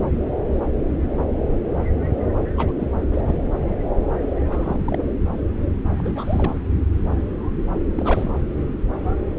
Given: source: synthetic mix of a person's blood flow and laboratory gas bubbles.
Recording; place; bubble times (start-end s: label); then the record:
Doppler ultrasound of blood flow; subclavian vein
2.57-2.72 s: bubbles
2.78-2.88 s: bubbles
3.11-3.35 s: bubbles
4.44-4.98 s: bubbles
5.97-6.56 s: bubbles
7.96-8.30 s: bubbles
From the record:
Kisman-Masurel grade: 221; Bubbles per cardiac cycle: several, 3 to 8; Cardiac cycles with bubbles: 10 to 50%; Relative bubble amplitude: barely perceptible (0.100 to 0.250); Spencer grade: 2 (many but less than half of the cardiac periods contain bubble signals, singularly or in groups); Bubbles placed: anywhere in the cardiac cycle